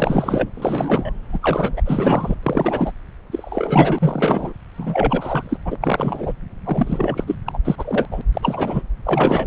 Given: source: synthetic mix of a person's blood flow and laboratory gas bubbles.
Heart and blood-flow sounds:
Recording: Doppler ultrasound of blood flow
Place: subclavian vein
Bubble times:
0.00-0.49 s: bubbles
0.54-1.12 s: bubbles
1.32-1.39 s: bubbles
1.42-1.82 s: bubbles
1.85-2.35 s: bubbles
2.43-2.92 s: bubbles
3.31-4.53 s: bubbles
4.77-5.57 s: bubbles
5.65-5.78 s: bubbles
5.81-6.33 s: bubbles
6.64-7.24 s: bubbles
7.27-7.35 s: bubbles
7.46-7.58 s: bubbles
7.65-8.07 s: bubbles
8.11-8.21 s: bubbles
8.34-8.82 s: bubbles
9.04-9.47 s: bubbles
From the record:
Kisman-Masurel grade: 343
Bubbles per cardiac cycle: rolling drumbeat, 9 or more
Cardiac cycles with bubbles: 100%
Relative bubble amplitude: loud (0.450 to 0.775)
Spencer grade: 3 (all of the cardiac periods contain showers or single bubble signals, but not dominating or overriding the cardiac motion signals)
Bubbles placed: anywhere in the cardiac cycle

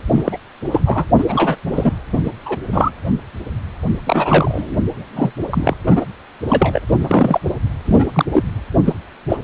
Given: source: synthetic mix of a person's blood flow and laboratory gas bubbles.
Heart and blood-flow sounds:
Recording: Doppler ultrasound of blood flow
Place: precordium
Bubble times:
0.11-0.38 s: bubbles
0.65-1.05 s: bubbles
1.18-1.25 s: bubbles
1.27-1.56 s: bubbles
1.66-1.92 s: bubbles
2.13-2.19 s: bubbles
2.24-2.31 s: bubbles
2.45-2.58 s: bubbles
2.72-2.90 s: bubbles
4.07-4.75 s: bubbles
4.95-5.33 s: bubbles
5.50-5.75 s: bubbles
5.86-6.05 s: bubbles
6.48-6.82 s: bubbles
6.89-7.40 s: bubbles
7.86-8.06 s: bubbles
8.14-8.25 s: bubbles
8.32-8.43 s: bubbles
8.85-8.94 s: bubbles
9.29-9.38 s: bubbles
9.42-9.44 s: bubbles
From the record:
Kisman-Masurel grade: 243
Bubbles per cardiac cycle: several, 3 to 8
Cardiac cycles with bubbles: 100%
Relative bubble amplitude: loud (0.450 to 0.775)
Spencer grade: 3 (all of the cardiac periods contain showers or single bubble signals, but not dominating or overriding the cardiac motion signals)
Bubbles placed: anywhere in the cardiac cycle

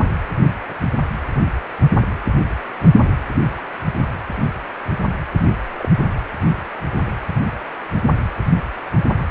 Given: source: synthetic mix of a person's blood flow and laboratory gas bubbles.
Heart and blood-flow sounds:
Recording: Doppler ultrasound of blood flow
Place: precordium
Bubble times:
5.79-5.88 s: bubbles
From the record:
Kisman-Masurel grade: 122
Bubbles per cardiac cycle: 1 to 2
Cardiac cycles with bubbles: 10 to 50%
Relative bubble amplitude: moderate (0.250 to 0.450)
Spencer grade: 2 (many but less than half of the cardiac periods contain bubble signals, singularly or in groups)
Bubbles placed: anywhere in the cardiac cycle

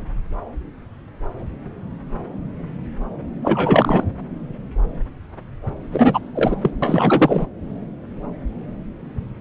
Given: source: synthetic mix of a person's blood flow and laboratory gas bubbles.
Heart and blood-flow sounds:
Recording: Doppler ultrasound of blood flow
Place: subclavian vein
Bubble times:
3.42-4.07 s: bubbles
5.92-6.19 s: bubbles
6.35-6.55 s: bubbles
6.61-6.71 s: bubbles
6.82-7.46 s: bubbles
From the record:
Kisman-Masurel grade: 223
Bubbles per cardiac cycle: several, 3 to 8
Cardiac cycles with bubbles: 10 to 50%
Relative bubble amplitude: loud (0.450 to 0.775)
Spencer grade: 2 (many but less than half of the cardiac periods contain bubble signals, singularly or in groups)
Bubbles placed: anywhere in the cardiac cycle

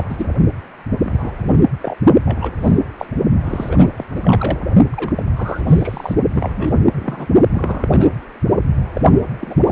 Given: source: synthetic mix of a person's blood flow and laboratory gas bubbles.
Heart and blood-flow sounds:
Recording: Doppler ultrasound of blood flow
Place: precordium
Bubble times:
0.00-0.04 s: bubbles
0.09-0.26 s: bubbles
1.03-1.58 s: bubbles
1.81-1.97 s: bubbles
2.25-2.52 s: bubbles
2.61-2.79 s: bubbles
2.98-3.06 s: bubbles
3.44-3.88 s: bubbles
3.96-4.05 s: bubbles
4.11-4.61 s: bubbles
4.92-5.23 s: bubbles
5.37-5.64 s: bubbles
5.67-6.15 s: bubbles
6.34-6.52 s: bubbles
6.56-6.74 s: bubbles
6.95-7.26 s: bubbles
7.52-7.89 s: bubbles
7.91-8.10 s: bubbles
8.94-9.02 s: bubbles
9.12-9.20 s: bubbles
9.40-9.55 s: bubbles
9.63-9.72 s: bubbles
From the record:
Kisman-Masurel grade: 232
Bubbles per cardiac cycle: several, 3 to 8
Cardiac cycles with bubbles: 50 to 99%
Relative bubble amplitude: moderate (0.250 to 0.450)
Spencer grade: 3 (all of the cardiac periods contain showers or single bubble signals, but not dominating or overriding the cardiac motion signals)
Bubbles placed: only in the low amplitude regions of the cardiac cycle

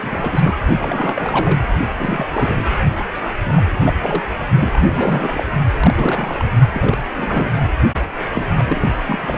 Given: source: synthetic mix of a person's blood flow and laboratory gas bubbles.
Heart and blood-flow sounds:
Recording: Doppler ultrasound of blood flow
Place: precordium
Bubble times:
0.00-0.57 s: bubbles
0.78-1.59 s: bubbles
1.99-2.64 s: bubbles
3.12-3.33 s: bubbles
3.45-3.62 s: bubbles
3.74-3.94 s: bubbles
4.00-4.24 s: bubbles
4.59-5.44 s: bubbles
5.77-6.45 s: bubbles
6.72-6.98 s: bubbles
7.17-7.53 s: bubbles
8.32-8.47 s: bubbles
8.57-8.90 s: bubbles
9.07-9.18 s: bubbles
9.21-9.38 s: bubbles
From the record:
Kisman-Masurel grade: 342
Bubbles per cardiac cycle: rolling drumbeat, 9 or more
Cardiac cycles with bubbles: 100%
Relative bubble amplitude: moderate (0.250 to 0.450)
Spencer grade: 3 (all of the cardiac periods contain showers or single bubble signals, but not dominating or overriding the cardiac motion signals)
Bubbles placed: only in the low amplitude regions of the cardiac cycle

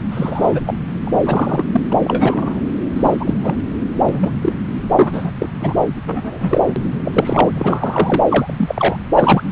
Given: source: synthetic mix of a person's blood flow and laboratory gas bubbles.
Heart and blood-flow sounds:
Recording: Doppler ultrasound of blood flow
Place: subclavian vein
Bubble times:
0.11-0.60 s: bubbles
0.66-0.74 s: bubbles
1.05-1.19 s: bubbles
1.25-1.65 s: bubbles
1.72-1.81 s: bubbles
1.91-1.93 s: bubbles
2.03-2.61 s: bubbles
2.96-3.17 s: bubbles
3.19-3.34 s: bubbles
3.43-3.56 s: bubbles
4.08-4.31 s: bubbles
4.41-4.52 s: bubbles
4.96-5.31 s: bubbles
5.35-5.48 s: bubbles
5.59-5.74 s: bubbles
6.06-6.61 s: bubbles
6.67-6.73 s: bubbles
7.04-7.50 s: bubbles
7.53-8.23 s: bubbles
8.28-8.54 s: bubbles
8.58-8.96 s: bubbles
9.15-9.44 s: bubbles
From the record:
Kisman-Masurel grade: 243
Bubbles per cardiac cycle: several, 3 to 8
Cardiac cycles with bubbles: 100%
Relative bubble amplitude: loud (0.450 to 0.775)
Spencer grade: 3 (all of the cardiac periods contain showers or single bubble signals, but not dominating or overriding the cardiac motion signals)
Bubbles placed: anywhere in the cardiac cycle

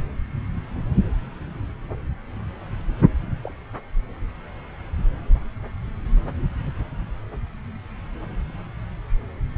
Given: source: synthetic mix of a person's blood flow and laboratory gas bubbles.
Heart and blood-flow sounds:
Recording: Doppler ultrasound of blood flow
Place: subclavian vein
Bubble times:
3.42-3.54 s: bubbles
From the record:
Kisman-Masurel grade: 111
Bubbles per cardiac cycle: 1 to 2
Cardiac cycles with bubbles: 1 to 10%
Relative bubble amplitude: barely perceptible (0.100 to 0.250)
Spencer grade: 1 (occasional bubble signal discernible with the cardiac motion signal, with majority of cardiac periods free of bubbles)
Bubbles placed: anywhere in the cardiac cycle

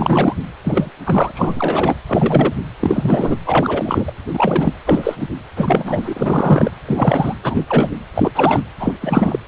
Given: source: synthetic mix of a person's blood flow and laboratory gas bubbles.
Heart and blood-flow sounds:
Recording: Doppler ultrasound of blood flow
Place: precordium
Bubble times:
0.00-0.34 s: bubbles
0.65-0.90 s: bubbles
1.06-1.31 s: bubbles
1.34-1.95 s: bubbles
2.08-2.53 s: bubbles
2.81-3.35 s: bubbles
3.46-4.13 s: bubbles
4.33-4.73 s: bubbles
4.85-5.26 s: bubbles
5.56-6.71 s: bubbles
6.88-7.34 s: bubbles
7.42-7.64 s: bubbles
7.68-7.91 s: bubbles
8.14-8.31 s: bubbles
8.34-8.60 s: bubbles
8.80-8.92 s: bubbles
9.01-9.39 s: bubbles
From the record:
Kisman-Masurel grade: 343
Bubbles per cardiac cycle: rolling drumbeat, 9 or more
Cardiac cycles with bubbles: 100%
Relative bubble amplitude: loud (0.450 to 0.775)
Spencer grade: 3 (all of the cardiac periods contain showers or single bubble signals, but not dominating or overriding the cardiac motion signals)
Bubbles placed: anywhere in the cardiac cycle

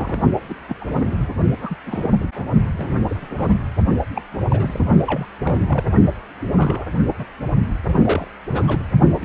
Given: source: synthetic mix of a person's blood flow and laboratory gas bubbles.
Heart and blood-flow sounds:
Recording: Doppler ultrasound of blood flow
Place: precordium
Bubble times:
0.00-0.21 s: bubbles
0.48-0.56 s: bubbles
0.69-0.75 s: bubbles
0.81-0.85 s: bubbles
0.88-1.28 s: bubbles
1.60-1.77 s: bubbles
1.85-2.10 s: bubbles
2.20-2.27 s: bubbles
2.35-2.48 s: bubbles
2.73-2.92 s: bubbles
3.08-3.55 s: bubbles
4.15-4.22 s: bubbles
4.31-4.42 s: bubbles
4.47-4.85 s: bubbles
5.07-5.26 s: bubbles
5.44-5.60 s: bubbles
5.68-5.84 s: bubbles
6.54-6.87 s: bubbles
7.19-7.26 s: bubbles
7.85-8.28 s: bubbles
8.49-8.82 s: bubbles
9.21-9.25 s: bubbles
From the record:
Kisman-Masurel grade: 242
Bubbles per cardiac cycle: several, 3 to 8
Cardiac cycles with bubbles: 100%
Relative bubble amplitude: moderate (0.250 to 0.450)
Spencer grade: 3 (all of the cardiac periods contain showers or single bubble signals, but not dominating or overriding the cardiac motion signals)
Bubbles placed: only in the low amplitude regions of the cardiac cycle

